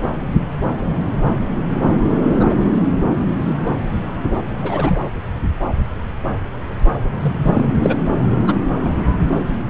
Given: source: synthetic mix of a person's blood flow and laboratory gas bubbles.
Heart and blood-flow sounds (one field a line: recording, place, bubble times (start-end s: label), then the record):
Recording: Doppler ultrasound of blood flow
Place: subclavian vein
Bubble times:
2.35-2.57 s: bubbles
3.39-3.57 s: bubbles
4.62-5.00 s: bubbles
7.21-7.66 s: bubbles
7.81-7.97 s: bubbles
8.46-8.57 s: bubbles
8.83-8.96 s: bubbles
From the record:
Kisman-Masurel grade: 122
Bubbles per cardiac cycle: 1 to 2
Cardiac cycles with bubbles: 10 to 50%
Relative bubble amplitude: moderate (0.250 to 0.450)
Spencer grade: 2 (many but less than half of the cardiac periods contain bubble signals, singularly or in groups)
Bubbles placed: anywhere in the cardiac cycle